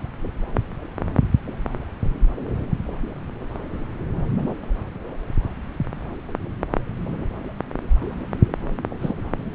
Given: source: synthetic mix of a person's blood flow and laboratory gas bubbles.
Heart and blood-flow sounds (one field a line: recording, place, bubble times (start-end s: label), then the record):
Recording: Doppler ultrasound of blood flow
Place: subclavian vein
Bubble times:
9.01-9.15 s: bubbles
From the record:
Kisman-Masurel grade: 112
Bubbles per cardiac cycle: 1 to 2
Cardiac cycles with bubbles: 1 to 10%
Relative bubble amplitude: moderate (0.250 to 0.450)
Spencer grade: 1 (occasional bubble signal discernible with the cardiac motion signal, with majority of cardiac periods free of bubbles)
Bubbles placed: anywhere in the cardiac cycle